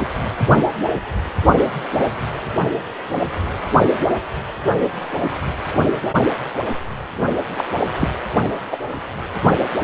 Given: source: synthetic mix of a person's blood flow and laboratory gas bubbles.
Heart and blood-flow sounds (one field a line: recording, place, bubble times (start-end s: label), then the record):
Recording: Doppler ultrasound of blood flow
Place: precordium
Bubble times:
7.57-7.64 s: bubbles
8.00-8.08 s: bubbles
8.71-8.77 s: bubbles
From the record:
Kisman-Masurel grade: 123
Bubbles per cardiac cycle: 1 to 2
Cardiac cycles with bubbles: 10 to 50%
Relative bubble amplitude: loud (0.450 to 0.775)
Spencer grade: 2 (many but less than half of the cardiac periods contain bubble signals, singularly or in groups)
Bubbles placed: only in the low amplitude regions of the cardiac cycle